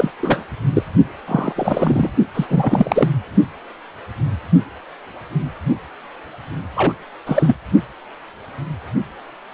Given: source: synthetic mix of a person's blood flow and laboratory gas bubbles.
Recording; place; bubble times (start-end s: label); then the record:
Doppler ultrasound of blood flow; precordium
0.00-0.11 s: bubbles
0.19-0.43 s: bubbles
0.74-0.82 s: bubbles
1.28-1.53 s: bubbles
1.56-2.10 s: bubbles
2.34-2.46 s: bubbles
2.50-3.08 s: bubbles
6.75-6.93 s: bubbles
7.26-7.55 s: bubbles
From the record:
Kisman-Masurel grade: 233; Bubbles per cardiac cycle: several, 3 to 8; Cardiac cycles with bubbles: 50 to 99%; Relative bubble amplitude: loud (0.450 to 0.775); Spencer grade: 3 (all of the cardiac periods contain showers or single bubble signals, but not dominating or overriding the cardiac motion signals); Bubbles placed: only in the low amplitude regions of the cardiac cycle